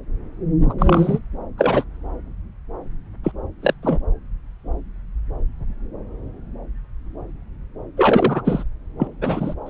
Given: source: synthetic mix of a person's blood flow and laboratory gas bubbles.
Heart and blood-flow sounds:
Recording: Doppler ultrasound of blood flow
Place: subclavian vein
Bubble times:
0.69-0.73 s: bubbles
0.79-1.19 s: bubbles
1.57-1.84 s: bubbles
3.23-3.32 s: bubbles
3.62-3.73 s: bubbles
3.83-3.99 s: bubbles
7.96-8.42 s: bubbles
8.45-8.63 s: bubbles
8.99-9.08 s: bubbles
9.21-9.54 s: bubbles
9.66-9.70 s: bubbles
From the record:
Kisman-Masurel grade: 223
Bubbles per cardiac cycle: several, 3 to 8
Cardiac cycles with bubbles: 10 to 50%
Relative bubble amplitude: loud (0.450 to 0.775)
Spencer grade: 2 (many but less than half of the cardiac periods contain bubble signals, singularly or in groups)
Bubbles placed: anywhere in the cardiac cycle

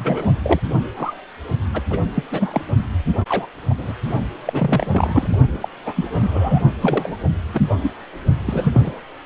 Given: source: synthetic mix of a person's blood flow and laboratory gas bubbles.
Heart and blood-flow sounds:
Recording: Doppler ultrasound of blood flow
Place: precordium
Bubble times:
0.00-0.32 s: bubbles
0.43-0.60 s: bubbles
0.96-1.13 s: bubbles
1.73-1.81 s: bubbles
1.90-1.98 s: bubbles
2.14-2.23 s: bubbles
2.31-2.61 s: bubbles
3.28-3.46 s: bubbles
3.70-3.74 s: bubbles
3.77-3.93 s: bubbles
4.45-5.38 s: bubbles
5.60-5.68 s: bubbles
5.85-6.08 s: bubbles
6.12-6.63 s: bubbles
6.81-7.17 s: bubbles
7.54-7.76 s: bubbles
7.82-7.92 s: bubbles
8.40-8.92 s: bubbles
From the record:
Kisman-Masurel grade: 242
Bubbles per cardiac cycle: several, 3 to 8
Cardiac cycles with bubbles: 100%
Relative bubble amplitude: moderate (0.250 to 0.450)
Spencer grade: 3 (all of the cardiac periods contain showers or single bubble signals, but not dominating or overriding the cardiac motion signals)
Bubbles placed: only in the low amplitude regions of the cardiac cycle

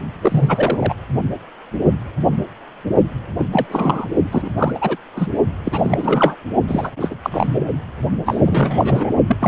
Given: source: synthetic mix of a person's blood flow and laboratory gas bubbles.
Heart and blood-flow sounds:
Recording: Doppler ultrasound of blood flow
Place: precordium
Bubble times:
0.21-0.94 s: bubbles
3.38-3.46 s: bubbles
3.51-3.67 s: bubbles
3.69-4.08 s: bubbles
4.32-4.50 s: bubbles
4.58-4.97 s: bubbles
5.16-5.27 s: bubbles
5.65-6.36 s: bubbles
6.67-6.91 s: bubbles
7.00-7.15 s: bubbles
7.23-7.72 s: bubbles
8.25-8.42 s: bubbles
8.46-9.12 s: bubbles
9.28-9.37 s: bubbles
9.39-9.48 s: bubbles
From the record:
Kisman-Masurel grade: 332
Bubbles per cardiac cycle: rolling drumbeat, 9 or more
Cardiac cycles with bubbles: 50 to 99%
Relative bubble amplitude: moderate (0.250 to 0.450)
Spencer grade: 3 (all of the cardiac periods contain showers or single bubble signals, but not dominating or overriding the cardiac motion signals)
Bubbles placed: only in the low amplitude regions of the cardiac cycle

